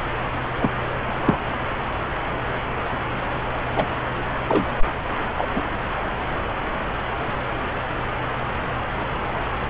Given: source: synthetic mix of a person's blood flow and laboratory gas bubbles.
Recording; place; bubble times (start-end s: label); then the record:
Doppler ultrasound of blood flow; subclavian vein
0.59-0.71 s: bubbles
1.25-1.39 s: bubbles
3.76-3.86 s: bubbles
4.48-4.65 s: bubbles
5.38-5.64 s: bubbles
From the record:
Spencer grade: 2 (many but less than half of the cardiac periods contain bubble signals, singularly or in groups); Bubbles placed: anywhere in the cardiac cycle